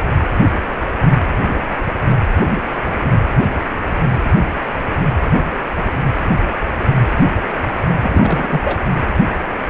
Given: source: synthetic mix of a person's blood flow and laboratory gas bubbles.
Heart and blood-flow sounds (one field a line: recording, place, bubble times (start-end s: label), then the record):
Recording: Doppler ultrasound of blood flow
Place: precordium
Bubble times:
8.00-8.80 s: bubbles
From the record:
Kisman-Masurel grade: 212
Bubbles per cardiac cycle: several, 3 to 8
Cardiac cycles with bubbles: 1 to 10%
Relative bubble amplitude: moderate (0.250 to 0.450)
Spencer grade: 1 (occasional bubble signal discernible with the cardiac motion signal, with majority of cardiac periods free of bubbles)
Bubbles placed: anywhere in the cardiac cycle